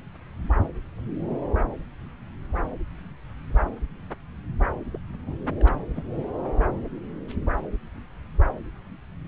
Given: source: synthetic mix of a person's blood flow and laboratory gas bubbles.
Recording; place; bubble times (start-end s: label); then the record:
Doppler ultrasound of blood flow; subclavian vein
0.63-0.72 s: bubbles
4.93-4.99 s: bubbles
5.19-5.37 s: bubbles
5.60-5.76 s: bubbles
5.96-6.02 s: bubbles
7.28-7.35 s: bubbles
From the record:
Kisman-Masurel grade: 121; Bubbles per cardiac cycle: 1 to 2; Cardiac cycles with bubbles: 10 to 50%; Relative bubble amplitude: barely perceptible (0.100 to 0.250); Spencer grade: 2 (many but less than half of the cardiac periods contain bubble signals, singularly or in groups); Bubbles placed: anywhere in the cardiac cycle